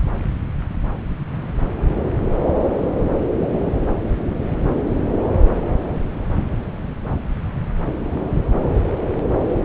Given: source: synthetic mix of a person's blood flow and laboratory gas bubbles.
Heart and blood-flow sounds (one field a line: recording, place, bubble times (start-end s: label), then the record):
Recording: Doppler ultrasound of blood flow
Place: subclavian vein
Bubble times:
no bubbles
From the record:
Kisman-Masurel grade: 000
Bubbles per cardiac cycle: 0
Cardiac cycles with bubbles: 0%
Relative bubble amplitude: no bubbles discernible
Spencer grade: 0 (complete lack of bubble signals)